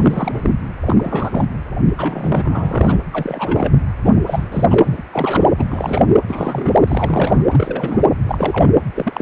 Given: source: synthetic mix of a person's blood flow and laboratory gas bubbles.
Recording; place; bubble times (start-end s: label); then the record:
Doppler ultrasound of blood flow; precordium
0.00-0.51 s: bubbles
0.85-1.45 s: bubbles
1.97-2.98 s: bubbles
3.12-3.74 s: bubbles
4.04-4.11 s: bubbles
4.16-4.21 s: bubbles
4.27-4.64 s: bubbles
4.70-5.03 s: bubbles
5.12-5.52 s: bubbles
5.57-6.06 s: bubbles
6.27-6.82 s: bubbles
6.87-7.44 s: bubbles
7.50-8.07 s: bubbles
8.25-8.71 s: bubbles
8.94-9.22 s: bubbles
From the record:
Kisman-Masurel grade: 342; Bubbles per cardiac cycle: rolling drumbeat, 9 or more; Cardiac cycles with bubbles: 100%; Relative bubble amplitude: moderate (0.250 to 0.450); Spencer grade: 3 (all of the cardiac periods contain showers or single bubble signals, but not dominating or overriding the cardiac motion signals); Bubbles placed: anywhere in the cardiac cycle